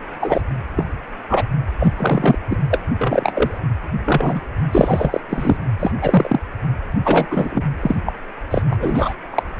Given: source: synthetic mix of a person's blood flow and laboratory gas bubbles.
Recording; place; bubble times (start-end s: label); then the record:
Doppler ultrasound of blood flow; precordium
0.20-0.42 s: bubbles
0.76-0.85 s: bubbles
1.29-1.42 s: bubbles
1.79-1.93 s: bubbles
1.97-2.38 s: bubbles
2.50-2.57 s: bubbles
2.71-2.83 s: bubbles
2.98-3.60 s: bubbles
4.04-4.40 s: bubbles
4.71-5.21 s: bubbles
5.29-5.56 s: bubbles
5.79-5.92 s: bubbles
6.01-6.39 s: bubbles
7.04-7.26 s: bubbles
7.30-7.63 s: bubbles
7.83-7.95 s: bubbles
8.05-8.13 s: bubbles
8.51-8.62 s: bubbles
8.70-9.15 s: bubbles
9.30-9.43 s: bubbles
From the record:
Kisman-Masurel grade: 243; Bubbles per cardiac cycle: several, 3 to 8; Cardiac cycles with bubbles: 100%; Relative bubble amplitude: loud (0.450 to 0.775); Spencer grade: 3 (all of the cardiac periods contain showers or single bubble signals, but not dominating or overriding the cardiac motion signals); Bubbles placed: anywhere in the cardiac cycle